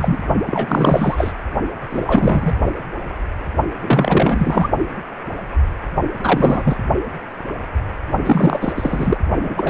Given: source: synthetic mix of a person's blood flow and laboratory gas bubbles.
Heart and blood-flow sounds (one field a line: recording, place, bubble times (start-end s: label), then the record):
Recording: Doppler ultrasound of blood flow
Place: precordium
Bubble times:
0.00-0.19 s: bubbles
0.47-1.33 s: bubbles
1.90-2.55 s: bubbles
3.81-4.69 s: bubbles
6.23-6.79 s: bubbles
8.25-9.17 s: bubbles
9.43-9.70 s: bubbles
From the record:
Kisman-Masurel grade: 333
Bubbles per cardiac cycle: rolling drumbeat, 9 or more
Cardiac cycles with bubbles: 50 to 99%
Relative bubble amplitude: loud (0.450 to 0.775)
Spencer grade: 3 (all of the cardiac periods contain showers or single bubble signals, but not dominating or overriding the cardiac motion signals)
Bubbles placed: only in the low amplitude regions of the cardiac cycle